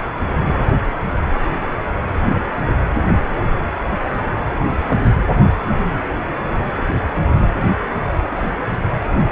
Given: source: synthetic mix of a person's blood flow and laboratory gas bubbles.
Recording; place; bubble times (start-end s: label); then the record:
Doppler ultrasound of blood flow; precordium
4.50-4.99 s: bubbles
From the record:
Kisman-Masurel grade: 112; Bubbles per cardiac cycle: 1 to 2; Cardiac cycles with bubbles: 1 to 10%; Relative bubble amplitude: moderate (0.250 to 0.450); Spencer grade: 1 (occasional bubble signal discernible with the cardiac motion signal, with majority of cardiac periods free of bubbles); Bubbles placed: anywhere in the cardiac cycle